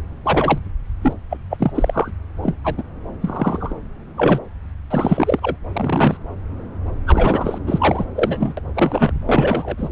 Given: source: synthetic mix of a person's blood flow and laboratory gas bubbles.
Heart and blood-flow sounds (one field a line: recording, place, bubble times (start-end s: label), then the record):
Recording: Doppler ultrasound of blood flow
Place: subclavian vein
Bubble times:
0.24-0.58 s: bubbles
1.01-1.13 s: bubbles
1.29-1.38 s: bubbles
1.50-1.72 s: bubbles
1.74-2.11 s: bubbles
2.43-2.56 s: bubbles
2.64-2.83 s: bubbles
3.21-3.75 s: bubbles
4.17-4.41 s: bubbles
4.90-5.56 s: bubbles
5.73-6.17 s: bubbles
7.06-7.58 s: bubbles
7.67-8.04 s: bubbles
8.15-8.54 s: bubbles
8.57-8.60 s: bubbles
8.75-9.12 s: bubbles
9.26-9.89 s: bubbles
From the record:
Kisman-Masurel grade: 243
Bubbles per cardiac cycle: several, 3 to 8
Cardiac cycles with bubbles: 100%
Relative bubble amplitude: loud (0.450 to 0.775)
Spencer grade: 3 (all of the cardiac periods contain showers or single bubble signals, but not dominating or overriding the cardiac motion signals)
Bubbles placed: anywhere in the cardiac cycle